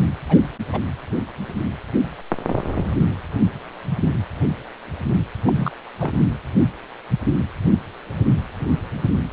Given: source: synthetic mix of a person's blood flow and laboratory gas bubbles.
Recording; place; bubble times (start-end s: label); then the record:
Doppler ultrasound of blood flow; precordium
0.29-0.37 s: bubbles
0.42-0.48 s: bubbles
0.72-0.80 s: bubbles
5.45-5.70 s: bubbles
5.99-6.18 s: bubbles
From the record:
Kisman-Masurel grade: 221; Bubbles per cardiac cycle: several, 3 to 8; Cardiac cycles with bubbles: 10 to 50%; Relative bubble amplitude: barely perceptible (0.100 to 0.250); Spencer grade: 2 (many but less than half of the cardiac periods contain bubble signals, singularly or in groups); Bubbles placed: anywhere in the cardiac cycle